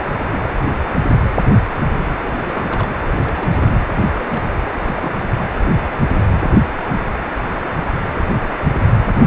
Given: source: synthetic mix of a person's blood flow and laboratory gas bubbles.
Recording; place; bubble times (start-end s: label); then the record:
Doppler ultrasound of blood flow; precordium
0.12-0.20 s: bubbles
0.29-0.38 s: bubbles
0.45-0.51 s: bubbles
2.17-2.88 s: bubbles
3.07-3.13 s: bubbles
3.23-3.76 s: bubbles
4.18-4.55 s: bubbles
4.86-5.28 s: bubbles
From the record:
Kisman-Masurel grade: 221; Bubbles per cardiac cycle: several, 3 to 8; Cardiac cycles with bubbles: 10 to 50%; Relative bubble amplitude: barely perceptible (0.100 to 0.250); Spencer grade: 2 (many but less than half of the cardiac periods contain bubble signals, singularly or in groups); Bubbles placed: anywhere in the cardiac cycle